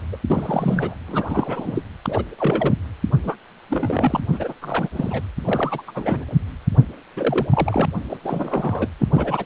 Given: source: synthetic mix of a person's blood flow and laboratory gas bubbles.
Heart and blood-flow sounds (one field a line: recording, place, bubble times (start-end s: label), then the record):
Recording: Doppler ultrasound of blood flow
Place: precordium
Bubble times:
0.12-0.17 s: bubbles
0.30-0.94 s: bubbles
1.07-1.82 s: bubbles
2.06-2.23 s: bubbles
2.38-2.74 s: bubbles
3.23-3.36 s: bubbles
3.69-4.20 s: bubbles
4.32-4.54 s: bubbles
4.62-4.89 s: bubbles
4.92-5.21 s: bubbles
5.42-5.83 s: bubbles
5.88-5.91 s: bubbles
5.95-6.25 s: bubbles
7.16-7.47 s: bubbles
7.50-7.86 s: bubbles
8.10-8.18 s: bubbles
8.23-8.88 s: bubbles
8.99-9.08 s: bubbles
9.12-9.45 s: bubbles
From the record:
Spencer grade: 3 (all of the cardiac periods contain showers or single bubble signals, but not dominating or overriding the cardiac motion signals)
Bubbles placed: anywhere in the cardiac cycle